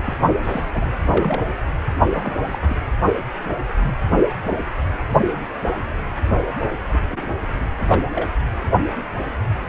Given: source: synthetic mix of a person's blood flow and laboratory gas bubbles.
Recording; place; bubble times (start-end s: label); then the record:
Doppler ultrasound of blood flow; precordium
0.05-0.16 s: bubbles
0.43-0.89 s: bubbles
1.03-1.42 s: bubbles
2.11-2.36 s: bubbles
2.51-2.58 s: bubbles
2.61-2.75 s: bubbles
6.89-6.98 s: bubbles
7.09-7.34 s: bubbles
7.89-8.01 s: bubbles
8.15-8.31 s: bubbles
From the record:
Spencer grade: 2 (many but less than half of the cardiac periods contain bubble signals, singularly or in groups); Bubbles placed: only in the low amplitude regions of the cardiac cycle